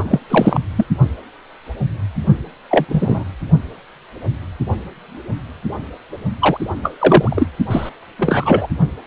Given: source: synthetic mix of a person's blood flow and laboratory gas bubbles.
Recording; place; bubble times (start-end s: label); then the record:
Doppler ultrasound of blood flow; precordium
0.00-0.19 s: bubbles
0.30-0.61 s: bubbles
0.77-0.86 s: bubbles
2.71-2.85 s: bubbles
2.88-3.24 s: bubbles
6.39-6.57 s: bubbles
6.83-7.47 s: bubbles
7.70-7.89 s: bubbles
8.18-8.68 s: bubbles
From the record:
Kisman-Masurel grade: 233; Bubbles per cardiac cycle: several, 3 to 8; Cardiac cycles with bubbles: 50 to 99%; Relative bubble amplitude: loud (0.450 to 0.775); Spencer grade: 3 (all of the cardiac periods contain showers or single bubble signals, but not dominating or overriding the cardiac motion signals); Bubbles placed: only in the low amplitude regions of the cardiac cycle